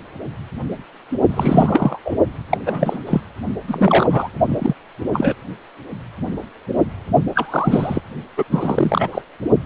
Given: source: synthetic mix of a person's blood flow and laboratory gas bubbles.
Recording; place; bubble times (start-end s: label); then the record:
Doppler ultrasound of blood flow; precordium
1.29-1.99 s: bubbles
2.05-2.16 s: bubbles
2.51-3.03 s: bubbles
3.06-3.22 s: bubbles
3.67-4.29 s: bubbles
4.49-4.74 s: bubbles
5.13-5.37 s: bubbles
7.36-8.02 s: bubbles
8.38-8.44 s: bubbles
8.51-9.09 s: bubbles
9.12-9.21 s: bubbles
From the record:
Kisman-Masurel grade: 233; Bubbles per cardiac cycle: several, 3 to 8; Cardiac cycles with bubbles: 50 to 99%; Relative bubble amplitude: loud (0.450 to 0.775); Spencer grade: 3 (all of the cardiac periods contain showers or single bubble signals, but not dominating or overriding the cardiac motion signals); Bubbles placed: only in the low amplitude regions of the cardiac cycle